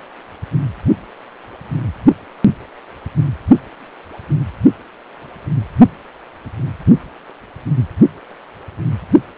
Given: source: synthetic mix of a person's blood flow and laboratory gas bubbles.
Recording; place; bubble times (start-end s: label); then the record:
Doppler ultrasound of blood flow; precordium
no bubbles
From the record:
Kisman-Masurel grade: 000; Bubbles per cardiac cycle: 0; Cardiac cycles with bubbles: 0%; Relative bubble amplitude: no bubbles discernible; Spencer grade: 0 (complete lack of bubble signals)